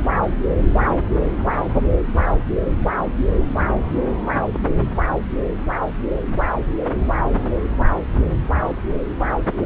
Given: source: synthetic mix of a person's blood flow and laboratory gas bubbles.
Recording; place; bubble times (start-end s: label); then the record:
Doppler ultrasound of blood flow; subclavian vein
4.53-4.61 s: bubbles
From the record:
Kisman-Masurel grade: 111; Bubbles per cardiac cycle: 1 to 2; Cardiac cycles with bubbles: 1 to 10%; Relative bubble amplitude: barely perceptible (0.100 to 0.250); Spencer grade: 1 (occasional bubble signal discernible with the cardiac motion signal, with majority of cardiac periods free of bubbles); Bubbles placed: anywhere in the cardiac cycle